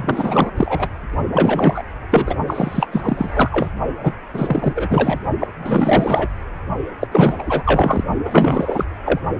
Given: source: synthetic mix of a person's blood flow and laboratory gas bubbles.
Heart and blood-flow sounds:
Doppler ultrasound of blood flow; precordium
0.00-0.51 s: bubbles
0.57-0.89 s: bubbles
1.31-1.82 s: bubbles
2.11-2.35 s: bubbles
2.47-3.68 s: bubbles
4.03-4.12 s: bubbles
4.33-5.20 s: bubbles
5.40-5.48 s: bubbles
5.62-6.27 s: bubbles
7.00-7.08 s: bubbles
7.11-7.44 s: bubbles
7.46-8.04 s: bubbles
8.25-8.86 s: bubbles
9.05-9.20 s: bubbles
From the record:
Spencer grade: 4 (maximum detectable bubble signal sounding continuously throughout systole and diastole of every cardiac period, and overriding the amplitude of the normal cardiac signals); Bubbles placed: only in the low amplitude regions of the cardiac cycle

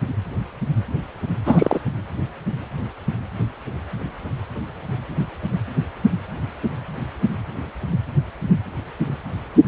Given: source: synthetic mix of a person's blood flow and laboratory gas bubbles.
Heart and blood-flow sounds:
Doppler ultrasound of blood flow; precordium
1.45-1.80 s: bubbles
From the record:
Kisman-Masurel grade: 213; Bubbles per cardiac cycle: several, 3 to 8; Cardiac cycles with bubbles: 1 to 10%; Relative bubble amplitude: loud (0.450 to 0.775); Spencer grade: 1 (occasional bubble signal discernible with the cardiac motion signal, with majority of cardiac periods free of bubbles); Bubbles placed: anywhere in the cardiac cycle

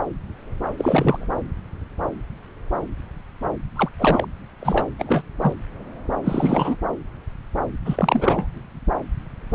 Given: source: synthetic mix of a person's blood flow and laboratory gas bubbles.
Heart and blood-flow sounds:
Doppler ultrasound of blood flow; subclavian vein
0.78-1.26 s: bubbles
3.76-3.89 s: bubbles
3.99-4.27 s: bubbles
4.61-4.85 s: bubbles
4.98-5.22 s: bubbles
5.41-5.52 s: bubbles
6.23-6.76 s: bubbles
7.85-8.47 s: bubbles
From the record:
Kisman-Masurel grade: 222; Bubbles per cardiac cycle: several, 3 to 8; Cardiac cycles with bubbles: 10 to 50%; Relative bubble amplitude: moderate (0.250 to 0.450); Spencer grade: 2 (many but less than half of the cardiac periods contain bubble signals, singularly or in groups); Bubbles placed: anywhere in the cardiac cycle

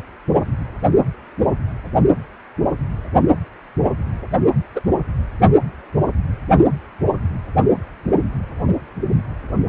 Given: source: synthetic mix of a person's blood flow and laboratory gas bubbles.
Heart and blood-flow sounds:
Doppler ultrasound of blood flow; precordium
4.75-4.81 s: bubbles
From the record:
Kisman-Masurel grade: 113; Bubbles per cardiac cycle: 1 to 2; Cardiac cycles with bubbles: 1 to 10%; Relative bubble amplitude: loud (0.450 to 0.775); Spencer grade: 1 (occasional bubble signal discernible with the cardiac motion signal, with majority of cardiac periods free of bubbles); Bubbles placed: only in the low amplitude regions of the cardiac cycle

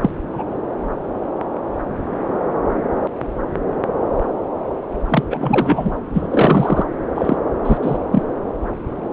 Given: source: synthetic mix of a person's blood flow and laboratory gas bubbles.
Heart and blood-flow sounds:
Doppler ultrasound of blood flow; subclavian vein
0.02-0.10 s: bubbles
0.32-0.43 s: bubbles
5.08-5.24 s: bubbles
5.30-5.93 s: bubbles
6.13-6.28 s: bubbles
6.31-6.85 s: bubbles
7.15-7.38 s: bubbles
7.65-7.78 s: bubbles
7.82-7.98 s: bubbles
8.12-8.23 s: bubbles
From the record:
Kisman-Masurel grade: 223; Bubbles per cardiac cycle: several, 3 to 8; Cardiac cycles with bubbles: 10 to 50%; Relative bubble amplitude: loud (0.450 to 0.775); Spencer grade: 2 (many but less than half of the cardiac periods contain bubble signals, singularly or in groups); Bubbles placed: anywhere in the cardiac cycle

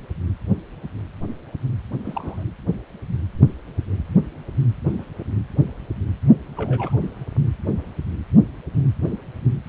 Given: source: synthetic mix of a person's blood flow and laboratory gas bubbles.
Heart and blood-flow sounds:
Doppler ultrasound of blood flow; precordium
2.04-2.44 s: bubbles
4.97-5.04 s: bubbles
5.19-5.24 s: bubbles
6.56-6.96 s: bubbles
From the record:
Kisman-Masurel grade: 121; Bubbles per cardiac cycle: 1 to 2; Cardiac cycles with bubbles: 10 to 50%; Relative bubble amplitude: barely perceptible (0.100 to 0.250); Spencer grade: 2 (many but less than half of the cardiac periods contain bubble signals, singularly or in groups); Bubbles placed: anywhere in the cardiac cycle

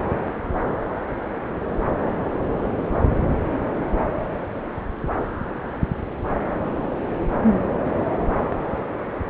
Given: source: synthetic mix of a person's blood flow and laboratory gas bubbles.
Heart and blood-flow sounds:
Doppler ultrasound of blood flow; subclavian vein
no bubbles
From the record:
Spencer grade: 0 (complete lack of bubble signals)

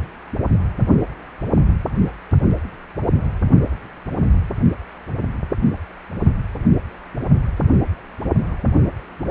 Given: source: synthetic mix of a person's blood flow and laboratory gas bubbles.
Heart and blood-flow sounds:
Doppler ultrasound of blood flow; precordium
no bubbles
From the record:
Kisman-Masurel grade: 000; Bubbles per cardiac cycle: 0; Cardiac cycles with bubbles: 0%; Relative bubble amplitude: no bubbles discernible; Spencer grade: 0 (complete lack of bubble signals)

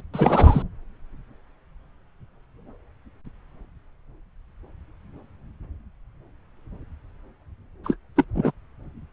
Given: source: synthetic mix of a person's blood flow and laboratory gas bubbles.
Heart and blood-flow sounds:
Doppler ultrasound of blood flow; subclavian vein
0.14-0.62 s: bubbles
7.83-7.96 s: bubbles
8.16-8.24 s: bubbles
8.35-8.51 s: bubbles
From the record:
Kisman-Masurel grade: 222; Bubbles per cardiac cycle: several, 3 to 8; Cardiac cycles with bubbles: 10 to 50%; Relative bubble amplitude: moderate (0.250 to 0.450); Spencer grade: 2 (many but less than half of the cardiac periods contain bubble signals, singularly or in groups); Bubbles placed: anywhere in the cardiac cycle

